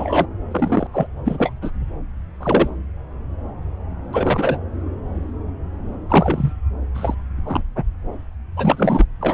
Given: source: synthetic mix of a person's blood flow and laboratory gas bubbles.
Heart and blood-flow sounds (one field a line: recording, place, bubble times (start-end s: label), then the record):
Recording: Doppler ultrasound of blood flow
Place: subclavian vein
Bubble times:
0.00-0.26 s: bubbles
0.51-0.87 s: bubbles
0.92-1.06 s: bubbles
1.25-1.52 s: bubbles
1.62-1.72 s: bubbles
2.40-2.69 s: bubbles
4.12-4.57 s: bubbles
6.09-6.53 s: bubbles
6.94-7.14 s: bubbles
7.36-7.83 s: bubbles
8.56-9.06 s: bubbles
9.21-9.34 s: bubbles
From the record:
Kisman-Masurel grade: 233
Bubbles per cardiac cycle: several, 3 to 8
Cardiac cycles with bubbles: 50 to 99%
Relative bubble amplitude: loud (0.450 to 0.775)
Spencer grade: 3 (all of the cardiac periods contain showers or single bubble signals, but not dominating or overriding the cardiac motion signals)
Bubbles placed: anywhere in the cardiac cycle